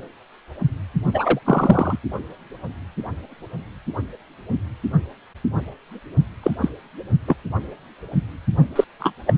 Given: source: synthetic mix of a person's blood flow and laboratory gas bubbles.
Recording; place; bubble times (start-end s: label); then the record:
Doppler ultrasound of blood flow; precordium
1.14-1.40 s: bubbles
1.46-1.97 s: bubbles
6.42-6.51 s: bubbles
6.61-6.69 s: bubbles
7.26-7.36 s: bubbles
8.76-8.84 s: bubbles
8.99-9.12 s: bubbles
9.27-9.34 s: bubbles
From the record:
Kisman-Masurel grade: 223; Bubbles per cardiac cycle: several, 3 to 8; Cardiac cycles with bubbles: 10 to 50%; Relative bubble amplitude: loud (0.450 to 0.775); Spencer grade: 2 (many but less than half of the cardiac periods contain bubble signals, singularly or in groups); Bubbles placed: only in the low amplitude regions of the cardiac cycle